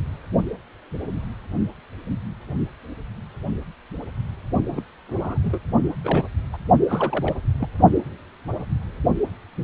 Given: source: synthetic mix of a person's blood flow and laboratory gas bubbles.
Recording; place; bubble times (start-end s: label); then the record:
Doppler ultrasound of blood flow; precordium
4.71-4.82 s: bubbles
5.08-5.39 s: bubbles
5.43-5.59 s: bubbles
6.04-6.27 s: bubbles
6.53-6.58 s: bubbles
6.88-7.36 s: bubbles
7.59-7.68 s: bubbles
From the record:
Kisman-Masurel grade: 222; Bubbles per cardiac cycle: several, 3 to 8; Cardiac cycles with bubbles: 10 to 50%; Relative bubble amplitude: moderate (0.250 to 0.450); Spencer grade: 2 (many but less than half of the cardiac periods contain bubble signals, singularly or in groups); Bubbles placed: only in the low amplitude regions of the cardiac cycle